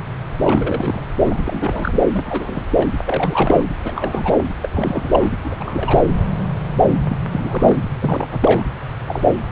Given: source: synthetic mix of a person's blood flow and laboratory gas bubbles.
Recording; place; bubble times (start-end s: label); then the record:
Doppler ultrasound of blood flow; subclavian vein
0.43-1.02 s: bubbles
1.25-1.99 s: bubbles
2.12-2.65 s: bubbles
2.71-2.88 s: bubbles
3.05-3.63 s: bubbles
3.83-4.44 s: bubbles
4.62-4.69 s: bubbles
4.74-5.31 s: bubbles
5.44-6.02 s: bubbles
7.08-7.18 s: bubbles
7.29-7.77 s: bubbles
8.01-8.28 s: bubbles
8.31-8.63 s: bubbles
9.08-9.29 s: bubbles
From the record:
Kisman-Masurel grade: 332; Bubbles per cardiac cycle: rolling drumbeat, 9 or more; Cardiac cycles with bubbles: 50 to 99%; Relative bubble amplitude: moderate (0.250 to 0.450); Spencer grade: 3 (all of the cardiac periods contain showers or single bubble signals, but not dominating or overriding the cardiac motion signals); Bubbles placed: anywhere in the cardiac cycle